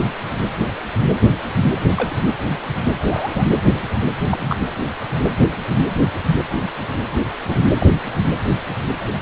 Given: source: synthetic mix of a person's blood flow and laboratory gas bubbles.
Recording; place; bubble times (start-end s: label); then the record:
Doppler ultrasound of blood flow; precordium
1.96-2.15 s: bubbles
3.00-3.44 s: bubbles
4.29-4.56 s: bubbles
7.45-7.61 s: bubbles
7.79-7.87 s: bubbles
From the record:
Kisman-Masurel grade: 122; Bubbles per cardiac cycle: 1 to 2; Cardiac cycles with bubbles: 10 to 50%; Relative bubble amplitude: moderate (0.250 to 0.450); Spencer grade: 2 (many but less than half of the cardiac periods contain bubble signals, singularly or in groups); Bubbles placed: anywhere in the cardiac cycle